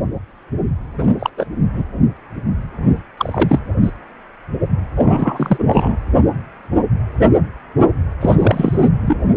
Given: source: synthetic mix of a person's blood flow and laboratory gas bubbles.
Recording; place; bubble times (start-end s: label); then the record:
Doppler ultrasound of blood flow; precordium
0.95-1.30 s: bubbles
1.37-1.45 s: bubbles
1.73-1.83 s: bubbles
3.17-3.59 s: bubbles
3.82-3.92 s: bubbles
4.96-5.97 s: bubbles
8.21-8.88 s: bubbles
9.01-9.15 s: bubbles
From the record:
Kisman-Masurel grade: 233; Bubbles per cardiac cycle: several, 3 to 8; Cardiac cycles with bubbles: 50 to 99%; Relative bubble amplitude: loud (0.450 to 0.775); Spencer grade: 3 (all of the cardiac periods contain showers or single bubble signals, but not dominating or overriding the cardiac motion signals); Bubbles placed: anywhere in the cardiac cycle